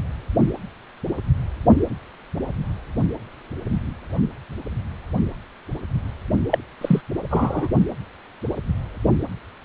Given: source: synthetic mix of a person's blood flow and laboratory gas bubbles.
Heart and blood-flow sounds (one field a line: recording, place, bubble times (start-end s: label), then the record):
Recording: Doppler ultrasound of blood flow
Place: precordium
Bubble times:
6.50-6.58 s: bubbles
6.81-7.01 s: bubbles
7.30-7.68 s: bubbles
From the record:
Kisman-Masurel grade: 213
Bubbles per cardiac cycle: several, 3 to 8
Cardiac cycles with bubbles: 1 to 10%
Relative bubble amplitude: loud (0.450 to 0.775)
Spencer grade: 1 (occasional bubble signal discernible with the cardiac motion signal, with majority of cardiac periods free of bubbles)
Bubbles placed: only in the low amplitude regions of the cardiac cycle